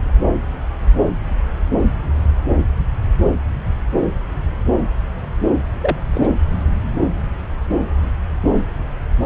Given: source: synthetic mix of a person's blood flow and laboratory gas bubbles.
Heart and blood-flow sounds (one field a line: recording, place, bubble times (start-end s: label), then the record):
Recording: Doppler ultrasound of blood flow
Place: subclavian vein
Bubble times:
5.80-5.97 s: bubbles
6.14-6.28 s: bubbles
From the record:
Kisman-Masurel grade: 112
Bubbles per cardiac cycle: 1 to 2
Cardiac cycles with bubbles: 1 to 10%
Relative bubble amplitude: moderate (0.250 to 0.450)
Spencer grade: 1 (occasional bubble signal discernible with the cardiac motion signal, with majority of cardiac periods free of bubbles)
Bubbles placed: anywhere in the cardiac cycle